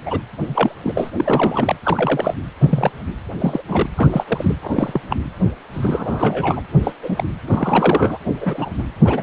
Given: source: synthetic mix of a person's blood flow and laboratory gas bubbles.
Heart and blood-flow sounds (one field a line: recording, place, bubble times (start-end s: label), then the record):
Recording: Doppler ultrasound of blood flow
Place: precordium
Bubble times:
0.05-0.21 s: bubbles
0.46-0.75 s: bubbles
0.83-1.11 s: bubbles
1.17-1.76 s: bubbles
1.83-2.34 s: bubbles
2.61-2.91 s: bubbles
3.40-3.62 s: bubbles
3.68-3.89 s: bubbles
3.97-4.24 s: bubbles
4.27-4.55 s: bubbles
4.63-5.01 s: bubbles
5.10-5.17 s: bubbles
5.73-6.62 s: bubbles
6.83-6.92 s: bubbles
7.02-7.23 s: bubbles
7.47-8.18 s: bubbles
8.41-8.69 s: bubbles
8.78-8.84 s: bubbles
9.04-9.23 s: bubbles
From the record:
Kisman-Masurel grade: 242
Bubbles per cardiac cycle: several, 3 to 8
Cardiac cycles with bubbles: 100%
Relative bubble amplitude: moderate (0.250 to 0.450)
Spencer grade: 3 (all of the cardiac periods contain showers or single bubble signals, but not dominating or overriding the cardiac motion signals)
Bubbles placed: anywhere in the cardiac cycle